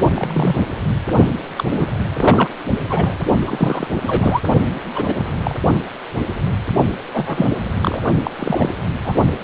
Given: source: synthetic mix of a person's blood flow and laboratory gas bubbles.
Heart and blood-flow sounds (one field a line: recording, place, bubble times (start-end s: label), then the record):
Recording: Doppler ultrasound of blood flow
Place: precordium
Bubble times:
0.14-0.56 s: bubbles
1.57-1.64 s: bubbles
1.71-1.86 s: bubbles
2.17-2.51 s: bubbles
2.89-3.23 s: bubbles
3.47-3.88 s: bubbles
3.93-4.42 s: bubbles
4.94-5.16 s: bubbles
5.18-5.35 s: bubbles
5.43-5.55 s: bubbles
7.12-7.49 s: bubbles
7.82-8.00 s: bubbles
8.23-8.31 s: bubbles
8.39-8.70 s: bubbles
9.04-9.14 s: bubbles
From the record:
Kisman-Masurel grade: 232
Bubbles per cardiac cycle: several, 3 to 8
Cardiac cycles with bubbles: 50 to 99%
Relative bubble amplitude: moderate (0.250 to 0.450)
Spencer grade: 3 (all of the cardiac periods contain showers or single bubble signals, but not dominating or overriding the cardiac motion signals)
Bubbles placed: only in the low amplitude regions of the cardiac cycle